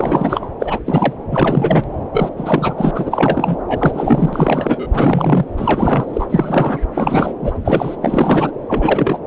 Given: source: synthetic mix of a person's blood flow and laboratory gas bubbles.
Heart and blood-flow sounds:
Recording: Doppler ultrasound of blood flow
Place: subclavian vein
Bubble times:
0.00-0.52 s: bubbles
0.60-0.80 s: bubbles
0.86-1.13 s: bubbles
1.31-1.84 s: bubbles
2.11-2.29 s: bubbles
2.36-2.73 s: bubbles
2.77-2.91 s: bubbles
2.94-3.57 s: bubbles
3.67-4.87 s: bubbles
4.90-5.46 s: bubbles
5.57-6.06 s: bubbles
6.13-6.26 s: bubbles
6.29-6.79 s: bubbles
6.95-7.34 s: bubbles
7.41-7.53 s: bubbles
7.64-7.96 s: bubbles
8.02-8.51 s: bubbles
8.68-9.19 s: bubbles
From the record:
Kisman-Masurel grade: 343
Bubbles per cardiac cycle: rolling drumbeat, 9 or more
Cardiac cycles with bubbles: 100%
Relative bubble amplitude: loud (0.450 to 0.775)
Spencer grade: 3 (all of the cardiac periods contain showers or single bubble signals, but not dominating or overriding the cardiac motion signals)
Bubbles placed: anywhere in the cardiac cycle

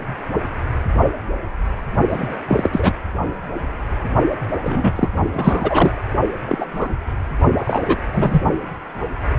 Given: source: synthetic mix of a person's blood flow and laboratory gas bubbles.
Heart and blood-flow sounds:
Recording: Doppler ultrasound of blood flow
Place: precordium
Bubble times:
2.11-2.38 s: bubbles
2.48-2.70 s: bubbles
2.72-2.92 s: bubbles
4.62-5.09 s: bubbles
5.33-5.95 s: bubbles
6.48-6.66 s: bubbles
6.69-6.89 s: bubbles
7.58-7.98 s: bubbles
8.12-8.40 s: bubbles
From the record:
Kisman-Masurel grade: 233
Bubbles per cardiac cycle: several, 3 to 8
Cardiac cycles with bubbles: 50 to 99%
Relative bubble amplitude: loud (0.450 to 0.775)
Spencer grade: 3 (all of the cardiac periods contain showers or single bubble signals, but not dominating or overriding the cardiac motion signals)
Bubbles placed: only in the low amplitude regions of the cardiac cycle

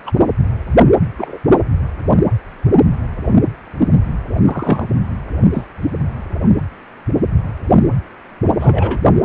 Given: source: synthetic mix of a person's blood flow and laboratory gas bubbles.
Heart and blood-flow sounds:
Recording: Doppler ultrasound of blood flow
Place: precordium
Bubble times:
0.06-0.11 s: bubbles
1.17-1.38 s: bubbles
3.79-4.01 s: bubbles
4.46-4.85 s: bubbles
5.52-5.67 s: bubbles
8.59-9.00 s: bubbles
From the record:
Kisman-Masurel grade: 123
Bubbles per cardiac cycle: 1 to 2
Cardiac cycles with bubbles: 10 to 50%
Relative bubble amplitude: loud (0.450 to 0.775)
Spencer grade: 2 (many but less than half of the cardiac periods contain bubble signals, singularly or in groups)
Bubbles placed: anywhere in the cardiac cycle

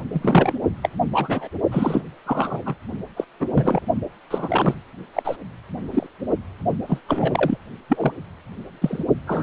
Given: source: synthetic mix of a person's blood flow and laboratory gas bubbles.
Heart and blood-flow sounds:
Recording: Doppler ultrasound of blood flow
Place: precordium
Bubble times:
0.13-0.53 s: bubbles
0.82-0.89 s: bubbles
1.12-1.49 s: bubbles
1.71-2.04 s: bubbles
2.25-2.75 s: bubbles
3.16-3.25 s: bubbles
3.40-3.46 s: bubbles
3.54-3.81 s: bubbles
4.31-4.75 s: bubbles
5.13-5.37 s: bubbles
5.91-6.07 s: bubbles
6.87-7.01 s: bubbles
7.08-7.58 s: bubbles
7.89-8.12 s: bubbles
8.81-9.05 s: bubbles
9.27-9.43 s: bubbles
From the record:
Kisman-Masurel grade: 243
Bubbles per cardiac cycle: several, 3 to 8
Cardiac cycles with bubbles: 100%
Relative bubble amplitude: loud (0.450 to 0.775)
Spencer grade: 3 (all of the cardiac periods contain showers or single bubble signals, but not dominating or overriding the cardiac motion signals)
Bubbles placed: only in the low amplitude regions of the cardiac cycle

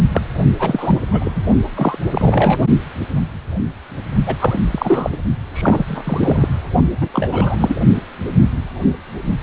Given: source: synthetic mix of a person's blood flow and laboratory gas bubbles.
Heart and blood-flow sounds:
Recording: Doppler ultrasound of blood flow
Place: precordium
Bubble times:
0.12-0.21 s: bubbles
0.58-1.00 s: bubbles
1.11-1.31 s: bubbles
1.35-1.43 s: bubbles
1.76-1.98 s: bubbles
2.10-2.58 s: bubbles
4.26-4.36 s: bubbles
4.39-4.59 s: bubbles
4.71-5.17 s: bubbles
5.54-5.85 s: bubbles
5.88-6.49 s: bubbles
7.01-7.09 s: bubbles
7.13-7.75 s: bubbles
From the record:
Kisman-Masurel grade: 332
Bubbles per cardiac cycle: rolling drumbeat, 9 or more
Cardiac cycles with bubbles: 50 to 99%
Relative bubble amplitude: moderate (0.250 to 0.450)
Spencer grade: 3 (all of the cardiac periods contain showers or single bubble signals, but not dominating or overriding the cardiac motion signals)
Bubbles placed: only in the low amplitude regions of the cardiac cycle

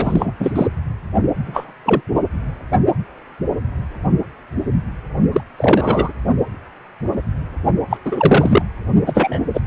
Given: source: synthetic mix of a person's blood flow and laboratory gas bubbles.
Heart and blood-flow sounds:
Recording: Doppler ultrasound of blood flow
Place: precordium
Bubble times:
0.00-0.33 s: bubbles
0.40-0.53 s: bubbles
0.56-0.68 s: bubbles
1.46-1.73 s: bubbles
1.85-2.01 s: bubbles
5.33-5.41 s: bubbles
5.57-6.12 s: bubbles
7.90-7.97 s: bubbles
8.05-8.62 s: bubbles
9.06-9.40 s: bubbles
9.54-9.60 s: bubbles
From the record:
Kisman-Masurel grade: 223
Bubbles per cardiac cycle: several, 3 to 8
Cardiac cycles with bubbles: 10 to 50%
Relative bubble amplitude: loud (0.450 to 0.775)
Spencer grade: 2 (many but less than half of the cardiac periods contain bubble signals, singularly or in groups)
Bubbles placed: only in the low amplitude regions of the cardiac cycle

